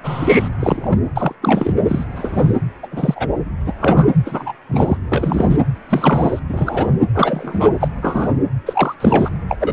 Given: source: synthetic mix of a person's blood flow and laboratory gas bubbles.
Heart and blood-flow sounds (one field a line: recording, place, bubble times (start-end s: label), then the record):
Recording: Doppler ultrasound of blood flow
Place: precordium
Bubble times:
0.04-0.48 s: bubbles
0.59-0.99 s: bubbles
1.16-1.34 s: bubbles
1.42-1.74 s: bubbles
1.88-2.04 s: bubbles
2.15-2.55 s: bubbles
2.82-2.88 s: bubbles
2.91-3.28 s: bubbles
3.66-3.73 s: bubbles
3.80-4.09 s: bubbles
4.25-4.52 s: bubbles
4.69-4.97 s: bubbles
5.07-5.58 s: bubbles
5.89-6.39 s: bubbles
6.49-6.88 s: bubbles
7.14-7.68 s: bubbles
7.80-7.88 s: bubbles
8.02-8.34 s: bubbles
8.65-8.95 s: bubbles
9.00-9.29 s: bubbles
9.49-9.56 s: bubbles
9.60-9.73 s: bubbles
From the record:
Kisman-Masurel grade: 233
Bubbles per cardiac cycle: several, 3 to 8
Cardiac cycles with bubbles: 50 to 99%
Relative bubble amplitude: loud (0.450 to 0.775)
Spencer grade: 3 (all of the cardiac periods contain showers or single bubble signals, but not dominating or overriding the cardiac motion signals)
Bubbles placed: anywhere in the cardiac cycle